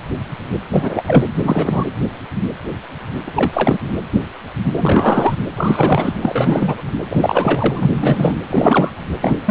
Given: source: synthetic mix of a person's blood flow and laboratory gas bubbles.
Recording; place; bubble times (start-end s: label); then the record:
Doppler ultrasound of blood flow; precordium
0.71-1.03 s: bubbles
1.07-1.25 s: bubbles
1.45-1.84 s: bubbles
3.27-3.32 s: bubbles
3.35-3.50 s: bubbles
3.53-3.79 s: bubbles
4.75-5.34 s: bubbles
5.56-6.14 s: bubbles
6.21-6.83 s: bubbles
7.10-8.36 s: bubbles
8.44-9.04 s: bubbles
9.21-9.39 s: bubbles
9.46-9.51 s: bubbles
From the record:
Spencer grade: 3 (all of the cardiac periods contain showers or single bubble signals, but not dominating or overriding the cardiac motion signals); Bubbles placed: anywhere in the cardiac cycle